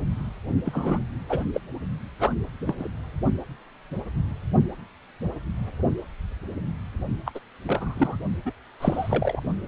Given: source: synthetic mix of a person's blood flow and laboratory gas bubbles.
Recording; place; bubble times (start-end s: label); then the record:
Doppler ultrasound of blood flow; precordium
0.65-0.98 s: bubbles
1.29-1.44 s: bubbles
1.53-1.60 s: bubbles
2.20-2.33 s: bubbles
2.67-2.75 s: bubbles
2.79-2.88 s: bubbles
7.26-7.31 s: bubbles
7.34-7.40 s: bubbles
7.67-8.16 s: bubbles
8.45-8.52 s: bubbles
8.80-9.40 s: bubbles
From the record:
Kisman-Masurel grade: 221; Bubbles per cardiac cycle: several, 3 to 8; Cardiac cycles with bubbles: 10 to 50%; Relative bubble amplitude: barely perceptible (0.100 to 0.250); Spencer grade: 2 (many but less than half of the cardiac periods contain bubble signals, singularly or in groups); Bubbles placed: only in the low amplitude regions of the cardiac cycle